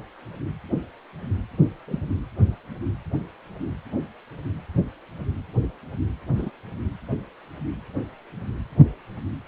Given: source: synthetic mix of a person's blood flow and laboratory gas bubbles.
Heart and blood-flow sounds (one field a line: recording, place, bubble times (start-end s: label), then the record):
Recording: Doppler ultrasound of blood flow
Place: precordium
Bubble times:
1.88-2.00 s: bubbles
6.37-6.50 s: bubbles
From the record:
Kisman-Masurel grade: 121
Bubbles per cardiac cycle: 1 to 2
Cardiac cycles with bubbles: 10 to 50%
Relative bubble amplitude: barely perceptible (0.100 to 0.250)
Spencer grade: 2 (many but less than half of the cardiac periods contain bubble signals, singularly or in groups)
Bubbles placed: anywhere in the cardiac cycle